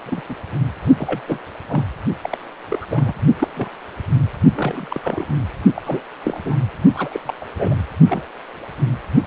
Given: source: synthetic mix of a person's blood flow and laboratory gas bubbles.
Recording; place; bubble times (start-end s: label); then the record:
Doppler ultrasound of blood flow; precordium
0.05-0.22 s: bubbles
0.28-0.35 s: bubbles
0.97-1.24 s: bubbles
1.28-1.40 s: bubbles
1.69-1.84 s: bubbles
2.22-2.38 s: bubbles
2.69-2.85 s: bubbles
2.89-3.14 s: bubbles
3.39-3.48 s: bubbles
3.56-3.68 s: bubbles
4.54-4.88 s: bubbles
4.90-5.00 s: bubbles
5.04-5.26 s: bubbles
5.75-6.00 s: bubbles
6.23-6.67 s: bubbles
6.93-7.09 s: bubbles
7.11-7.20 s: bubbles
7.25-7.33 s: bubbles
7.40-7.46 s: bubbles
7.56-7.78 s: bubbles
8.08-8.22 s: bubbles
From the record:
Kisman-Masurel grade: 232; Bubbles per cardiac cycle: several, 3 to 8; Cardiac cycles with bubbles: 50 to 99%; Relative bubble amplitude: moderate (0.250 to 0.450); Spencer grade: 3 (all of the cardiac periods contain showers or single bubble signals, but not dominating or overriding the cardiac motion signals); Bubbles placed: only in the low amplitude regions of the cardiac cycle